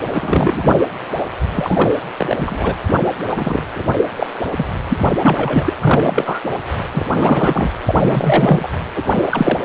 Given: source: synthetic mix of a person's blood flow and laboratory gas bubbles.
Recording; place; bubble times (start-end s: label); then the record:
Doppler ultrasound of blood flow; precordium
0.13-0.76 s: bubbles
1.54-1.89 s: bubbles
2.17-2.77 s: bubbles
3.27-3.63 s: bubbles
3.75-3.83 s: bubbles
3.97-4.04 s: bubbles
4.16-4.26 s: bubbles
4.57-4.67 s: bubbles
4.90-4.97 s: bubbles
5.21-5.73 s: bubbles
5.82-6.41 s: bubbles
6.92-7.05 s: bubbles
7.15-7.71 s: bubbles
7.86-8.67 s: bubbles
8.95-9.02 s: bubbles
9.16-9.58 s: bubbles
From the record:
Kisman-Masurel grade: 343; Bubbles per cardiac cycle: rolling drumbeat, 9 or more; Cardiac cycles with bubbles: 100%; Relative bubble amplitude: loud (0.450 to 0.775); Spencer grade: 3 (all of the cardiac periods contain showers or single bubble signals, but not dominating or overriding the cardiac motion signals); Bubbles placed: anywhere in the cardiac cycle